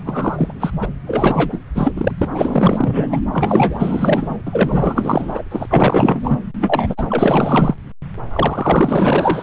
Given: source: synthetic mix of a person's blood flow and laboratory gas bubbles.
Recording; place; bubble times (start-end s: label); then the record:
Doppler ultrasound of blood flow; subclavian vein
0.00-0.53 s: bubbles
0.59-0.85 s: bubbles
1.06-1.58 s: bubbles
1.75-1.93 s: bubbles
1.96-2.11 s: bubbles
2.18-3.24 s: bubbles
3.33-4.37 s: bubbles
4.46-5.42 s: bubbles
5.50-5.67 s: bubbles
5.70-6.38 s: bubbles
6.61-7.74 s: bubbles
8.33-9.43 s: bubbles
From the record:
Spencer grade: 4 (maximum detectable bubble signal sounding continuously throughout systole and diastole of every cardiac period, and overriding the amplitude of the normal cardiac signals); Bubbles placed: anywhere in the cardiac cycle